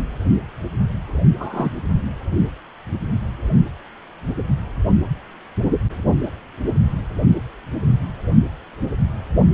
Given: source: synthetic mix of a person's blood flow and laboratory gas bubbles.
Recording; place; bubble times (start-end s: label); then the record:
Doppler ultrasound of blood flow; precordium
1.39-1.70 s: bubbles
From the record:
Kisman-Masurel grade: 123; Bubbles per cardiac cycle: 1 to 2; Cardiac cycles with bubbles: 10 to 50%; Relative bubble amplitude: loud (0.450 to 0.775); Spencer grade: 2 (many but less than half of the cardiac periods contain bubble signals, singularly or in groups); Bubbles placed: only in the low amplitude regions of the cardiac cycle